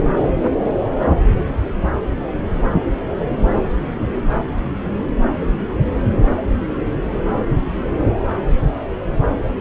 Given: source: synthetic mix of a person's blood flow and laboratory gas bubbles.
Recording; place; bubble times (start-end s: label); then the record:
Doppler ultrasound of blood flow; subclavian vein
no bubbles
From the record:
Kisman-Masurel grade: 000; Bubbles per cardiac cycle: 0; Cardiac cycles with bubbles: 0%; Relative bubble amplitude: no bubbles discernible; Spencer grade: 0 (complete lack of bubble signals)